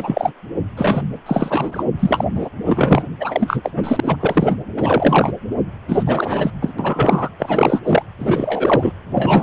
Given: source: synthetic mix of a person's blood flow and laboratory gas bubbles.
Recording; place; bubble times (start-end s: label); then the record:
Doppler ultrasound of blood flow; precordium
0.00-0.33 s: bubbles
0.77-1.19 s: bubbles
1.26-1.85 s: bubbles
1.99-2.24 s: bubbles
2.34-2.49 s: bubbles
2.65-3.03 s: bubbles
3.20-3.71 s: bubbles
3.75-4.00 s: bubbles
4.02-4.17 s: bubbles
4.20-4.55 s: bubbles
4.77-5.33 s: bubbles
5.88-6.03 s: bubbles
6.06-6.50 s: bubbles
6.62-6.73 s: bubbles
6.79-7.29 s: bubbles
7.39-7.80 s: bubbles
7.84-8.03 s: bubbles
8.19-8.92 s: bubbles
9.14-9.43 s: bubbles
From the record:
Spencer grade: 3 (all of the cardiac periods contain showers or single bubble signals, but not dominating or overriding the cardiac motion signals); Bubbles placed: anywhere in the cardiac cycle